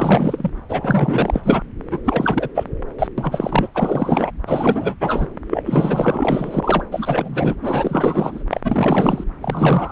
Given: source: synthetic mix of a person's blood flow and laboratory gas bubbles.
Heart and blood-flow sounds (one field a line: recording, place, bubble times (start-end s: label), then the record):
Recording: Doppler ultrasound of blood flow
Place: subclavian vein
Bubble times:
0.00-0.50 s: bubbles
0.69-1.62 s: bubbles
1.91-2.00 s: bubbles
2.04-2.49 s: bubbles
2.54-2.63 s: bubbles
2.98-3.07 s: bubbles
3.17-3.67 s: bubbles
3.74-4.31 s: bubbles
4.47-4.97 s: bubbles
5.01-5.27 s: bubbles
5.50-5.63 s: bubbles
5.66-6.86 s: bubbles
6.91-7.55 s: bubbles
7.61-8.43 s: bubbles
8.50-8.60 s: bubbles
8.63-9.24 s: bubbles
9.40-9.92 s: bubbles
From the record:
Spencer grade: 4 (maximum detectable bubble signal sounding continuously throughout systole and diastole of every cardiac period, and overriding the amplitude of the normal cardiac signals)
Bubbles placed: anywhere in the cardiac cycle